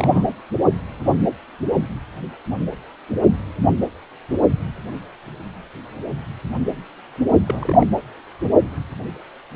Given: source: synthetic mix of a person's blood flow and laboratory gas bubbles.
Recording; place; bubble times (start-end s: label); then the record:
Doppler ultrasound of blood flow; precordium
0.00-0.23 s: bubbles
7.47-7.87 s: bubbles
From the record:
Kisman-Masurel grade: 211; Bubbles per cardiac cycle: several, 3 to 8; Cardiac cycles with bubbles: 1 to 10%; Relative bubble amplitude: barely perceptible (0.100 to 0.250); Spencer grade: 1 (occasional bubble signal discernible with the cardiac motion signal, with majority of cardiac periods free of bubbles); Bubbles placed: anywhere in the cardiac cycle